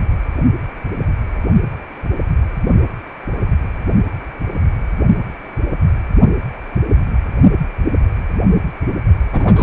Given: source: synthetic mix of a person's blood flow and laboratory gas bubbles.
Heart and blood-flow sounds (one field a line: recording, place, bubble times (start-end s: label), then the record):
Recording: Doppler ultrasound of blood flow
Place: precordium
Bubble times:
9.33-9.63 s: bubbles
From the record:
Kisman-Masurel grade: 213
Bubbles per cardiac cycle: several, 3 to 8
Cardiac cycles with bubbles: 1 to 10%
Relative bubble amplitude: loud (0.450 to 0.775)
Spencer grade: 1 (occasional bubble signal discernible with the cardiac motion signal, with majority of cardiac periods free of bubbles)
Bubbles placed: only in the low amplitude regions of the cardiac cycle